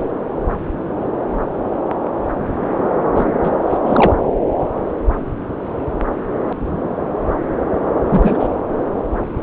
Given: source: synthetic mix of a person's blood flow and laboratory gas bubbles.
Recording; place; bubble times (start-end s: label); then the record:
Doppler ultrasound of blood flow; subclavian vein
3.15-3.25 s: bubbles
3.44-3.51 s: bubbles
3.69-3.77 s: bubbles
3.85-4.12 s: bubbles
8.05-8.47 s: bubbles
From the record:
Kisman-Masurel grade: 223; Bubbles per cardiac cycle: several, 3 to 8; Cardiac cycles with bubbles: 10 to 50%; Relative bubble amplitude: loud (0.450 to 0.775); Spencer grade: 2 (many but less than half of the cardiac periods contain bubble signals, singularly or in groups); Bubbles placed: anywhere in the cardiac cycle